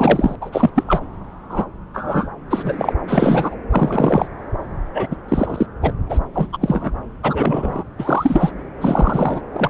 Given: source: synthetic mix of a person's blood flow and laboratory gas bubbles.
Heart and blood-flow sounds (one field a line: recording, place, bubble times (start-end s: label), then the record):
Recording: Doppler ultrasound of blood flow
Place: subclavian vein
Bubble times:
0.00-0.36 s: bubbles
0.41-0.70 s: bubbles
0.75-0.83 s: bubbles
0.88-1.00 s: bubbles
1.49-1.66 s: bubbles
1.94-2.28 s: bubbles
2.50-2.94 s: bubbles
3.07-3.56 s: bubbles
3.71-4.28 s: bubbles
4.94-5.07 s: bubbles
5.11-5.16 s: bubbles
5.28-5.66 s: bubbles
5.82-5.92 s: bubbles
6.09-6.19 s: bubbles
6.34-6.48 s: bubbles
6.53-6.58 s: bubbles
6.61-6.91 s: bubbles
7.23-7.84 s: bubbles
7.99-8.51 s: bubbles
8.80-9.42 s: bubbles
9.52-9.69 s: bubbles
From the record:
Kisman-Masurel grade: 243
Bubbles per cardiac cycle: several, 3 to 8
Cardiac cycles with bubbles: 100%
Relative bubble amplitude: loud (0.450 to 0.775)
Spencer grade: 3 (all of the cardiac periods contain showers or single bubble signals, but not dominating or overriding the cardiac motion signals)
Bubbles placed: anywhere in the cardiac cycle